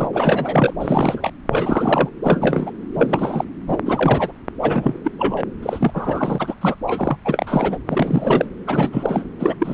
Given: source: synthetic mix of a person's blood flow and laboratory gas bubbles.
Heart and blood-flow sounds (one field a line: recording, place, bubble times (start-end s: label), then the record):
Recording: Doppler ultrasound of blood flow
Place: subclavian vein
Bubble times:
0.00-0.09 s: bubbles
0.12-0.73 s: bubbles
0.80-1.30 s: bubbles
1.50-2.09 s: bubbles
2.23-2.72 s: bubbles
2.94-3.45 s: bubbles
3.68-3.79 s: bubbles
3.86-4.32 s: bubbles
4.61-4.99 s: bubbles
5.04-5.12 s: bubbles
5.19-5.45 s: bubbles
5.62-5.92 s: bubbles
5.94-6.55 s: bubbles
6.61-6.75 s: bubbles
6.87-7.17 s: bubbles
7.25-7.78 s: bubbles
7.87-8.46 s: bubbles
8.67-9.24 s: bubbles
9.39-9.54 s: bubbles
9.60-9.74 s: bubbles
From the record:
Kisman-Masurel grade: 342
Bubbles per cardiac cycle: rolling drumbeat, 9 or more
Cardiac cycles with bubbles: 100%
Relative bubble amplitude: moderate (0.250 to 0.450)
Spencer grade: 3 (all of the cardiac periods contain showers or single bubble signals, but not dominating or overriding the cardiac motion signals)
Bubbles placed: anywhere in the cardiac cycle